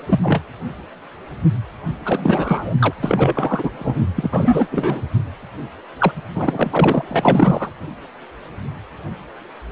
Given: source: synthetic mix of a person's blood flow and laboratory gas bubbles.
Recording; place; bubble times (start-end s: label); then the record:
Doppler ultrasound of blood flow; precordium
0.06-0.43 s: bubbles
2.05-2.73 s: bubbles
2.79-2.94 s: bubbles
3.02-3.71 s: bubbles
3.79-4.04 s: bubbles
4.16-4.69 s: bubbles
4.71-5.04 s: bubbles
5.99-6.12 s: bubbles
6.35-7.70 s: bubbles
From the record:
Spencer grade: 3 (all of the cardiac periods contain showers or single bubble signals, but not dominating or overriding the cardiac motion signals); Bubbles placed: anywhere in the cardiac cycle